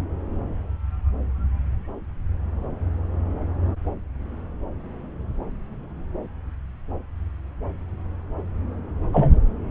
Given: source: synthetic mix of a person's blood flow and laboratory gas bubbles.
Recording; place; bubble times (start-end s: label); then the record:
Doppler ultrasound of blood flow; subclavian vein
9.12-9.37 s: bubbles
From the record:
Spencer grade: 1 (occasional bubble signal discernible with the cardiac motion signal, with majority of cardiac periods free of bubbles); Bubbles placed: anywhere in the cardiac cycle